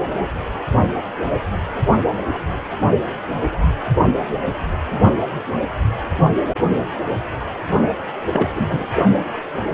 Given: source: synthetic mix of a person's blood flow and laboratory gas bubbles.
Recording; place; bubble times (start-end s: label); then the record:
Doppler ultrasound of blood flow; precordium
8.31-8.48 s: bubbles
8.55-8.66 s: bubbles
8.69-8.87 s: bubbles
From the record:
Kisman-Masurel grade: 212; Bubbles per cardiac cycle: several, 3 to 8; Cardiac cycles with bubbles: 1 to 10%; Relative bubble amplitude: moderate (0.250 to 0.450); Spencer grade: 1 (occasional bubble signal discernible with the cardiac motion signal, with majority of cardiac periods free of bubbles); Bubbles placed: only in the low amplitude regions of the cardiac cycle